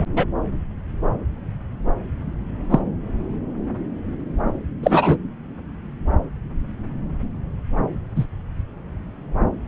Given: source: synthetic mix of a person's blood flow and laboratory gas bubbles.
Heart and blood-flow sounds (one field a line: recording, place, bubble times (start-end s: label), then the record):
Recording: Doppler ultrasound of blood flow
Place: subclavian vein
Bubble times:
0.00-0.03 s: bubbles
0.16-0.25 s: bubbles
2.71-2.79 s: bubbles
4.83-5.17 s: bubbles
8.16-8.26 s: bubbles
From the record:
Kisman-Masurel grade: 123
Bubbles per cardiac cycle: 1 to 2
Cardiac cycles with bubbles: 10 to 50%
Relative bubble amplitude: loud (0.450 to 0.775)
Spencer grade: 2 (many but less than half of the cardiac periods contain bubble signals, singularly or in groups)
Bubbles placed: anywhere in the cardiac cycle